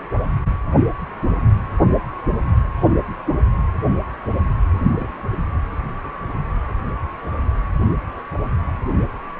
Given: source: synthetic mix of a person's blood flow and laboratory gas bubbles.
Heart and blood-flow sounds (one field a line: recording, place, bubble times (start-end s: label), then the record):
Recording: Doppler ultrasound of blood flow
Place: precordium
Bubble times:
4.92-5.08 s: bubbles
From the record:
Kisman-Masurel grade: 111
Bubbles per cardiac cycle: 1 to 2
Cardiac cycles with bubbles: 1 to 10%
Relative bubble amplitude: barely perceptible (0.100 to 0.250)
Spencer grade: 1 (occasional bubble signal discernible with the cardiac motion signal, with majority of cardiac periods free of bubbles)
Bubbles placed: anywhere in the cardiac cycle